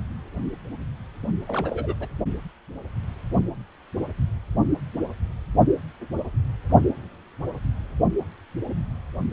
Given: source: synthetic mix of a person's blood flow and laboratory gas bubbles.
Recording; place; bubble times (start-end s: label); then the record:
Doppler ultrasound of blood flow; precordium
1.23-1.27 s: bubbles
1.47-1.95 s: bubbles
2.00-2.08 s: bubbles
From the record:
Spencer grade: 2 (many but less than half of the cardiac periods contain bubble signals, singularly or in groups); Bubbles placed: only in the low amplitude regions of the cardiac cycle